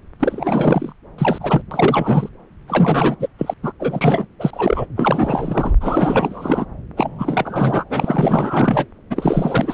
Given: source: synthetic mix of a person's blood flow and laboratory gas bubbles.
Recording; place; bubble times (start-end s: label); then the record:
Doppler ultrasound of blood flow; subclavian vein
0.20-0.93 s: bubbles
1.18-1.61 s: bubbles
1.71-2.29 s: bubbles
2.67-3.17 s: bubbles
3.19-3.28 s: bubbles
3.38-3.54 s: bubbles
3.62-3.72 s: bubbles
3.79-4.25 s: bubbles
4.39-4.50 s: bubbles
4.53-4.87 s: bubbles
4.96-5.75 s: bubbles
5.80-6.66 s: bubbles
6.96-7.84 s: bubbles
7.90-8.86 s: bubbles
9.10-9.74 s: bubbles
From the record:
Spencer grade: 4 (maximum detectable bubble signal sounding continuously throughout systole and diastole of every cardiac period, and overriding the amplitude of the normal cardiac signals); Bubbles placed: anywhere in the cardiac cycle